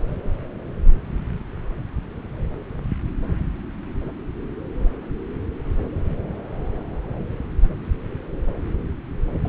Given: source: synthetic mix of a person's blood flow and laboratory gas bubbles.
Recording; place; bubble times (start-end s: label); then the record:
Doppler ultrasound of blood flow; subclavian vein
9.45-9.49 s: bubbles
From the record:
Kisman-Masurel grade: 213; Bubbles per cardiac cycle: several, 3 to 8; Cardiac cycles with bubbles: 1 to 10%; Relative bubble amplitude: loud (0.450 to 0.775); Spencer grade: 1 (occasional bubble signal discernible with the cardiac motion signal, with majority of cardiac periods free of bubbles); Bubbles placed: anywhere in the cardiac cycle